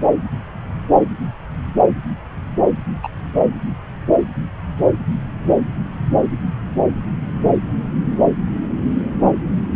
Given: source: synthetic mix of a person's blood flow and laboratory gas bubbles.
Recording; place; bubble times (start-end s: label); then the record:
Doppler ultrasound of blood flow; subclavian vein
3.02-3.08 s: bubbles
From the record:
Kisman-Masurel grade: 113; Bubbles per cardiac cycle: 1 to 2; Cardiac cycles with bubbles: 1 to 10%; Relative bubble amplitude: loud (0.450 to 0.775); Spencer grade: 1 (occasional bubble signal discernible with the cardiac motion signal, with majority of cardiac periods free of bubbles); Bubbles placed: anywhere in the cardiac cycle